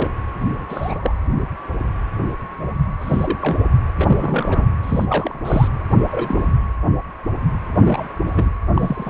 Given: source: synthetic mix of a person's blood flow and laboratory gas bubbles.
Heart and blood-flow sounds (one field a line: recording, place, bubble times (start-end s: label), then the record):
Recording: Doppler ultrasound of blood flow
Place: precordium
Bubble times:
0.00-0.11 s: bubbles
0.48-0.66 s: bubbles
0.69-1.15 s: bubbles
3.01-3.57 s: bubbles
3.98-4.67 s: bubbles
4.82-5.68 s: bubbles
6.11-6.51 s: bubbles
7.80-8.11 s: bubbles
8.26-8.49 s: bubbles
8.74-9.10 s: bubbles
From the record:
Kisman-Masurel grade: 232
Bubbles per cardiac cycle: several, 3 to 8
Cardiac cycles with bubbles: 50 to 99%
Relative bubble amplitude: moderate (0.250 to 0.450)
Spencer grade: 3 (all of the cardiac periods contain showers or single bubble signals, but not dominating or overriding the cardiac motion signals)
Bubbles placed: anywhere in the cardiac cycle